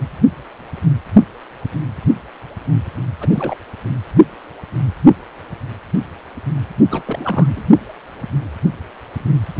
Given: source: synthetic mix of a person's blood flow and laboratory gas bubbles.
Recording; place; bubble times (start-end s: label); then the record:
Doppler ultrasound of blood flow; precordium
3.21-3.28 s: bubbles
3.31-3.56 s: bubbles
6.90-7.03 s: bubbles
7.05-7.64 s: bubbles
From the record:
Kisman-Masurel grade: 221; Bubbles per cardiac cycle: several, 3 to 8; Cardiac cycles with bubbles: 10 to 50%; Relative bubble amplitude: barely perceptible (0.100 to 0.250); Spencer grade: 2 (many but less than half of the cardiac periods contain bubble signals, singularly or in groups); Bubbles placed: only in the low amplitude regions of the cardiac cycle